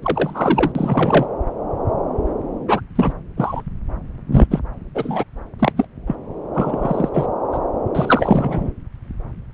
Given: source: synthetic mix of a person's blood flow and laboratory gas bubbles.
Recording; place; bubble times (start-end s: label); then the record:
Doppler ultrasound of blood flow; subclavian vein
0.02-0.72 s: bubbles
0.75-1.26 s: bubbles
2.68-2.81 s: bubbles
2.95-3.13 s: bubbles
3.36-3.62 s: bubbles
4.30-4.46 s: bubbles
4.50-4.59 s: bubbles
4.94-5.24 s: bubbles
5.59-5.72 s: bubbles
5.76-5.86 s: bubbles
6.07-6.15 s: bubbles
6.54-7.09 s: bubbles
7.13-7.26 s: bubbles
7.52-7.58 s: bubbles
7.95-8.73 s: bubbles
From the record:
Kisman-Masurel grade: 233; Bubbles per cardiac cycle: several, 3 to 8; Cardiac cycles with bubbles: 50 to 99%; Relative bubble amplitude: loud (0.450 to 0.775); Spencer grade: 3 (all of the cardiac periods contain showers or single bubble signals, but not dominating or overriding the cardiac motion signals); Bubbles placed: anywhere in the cardiac cycle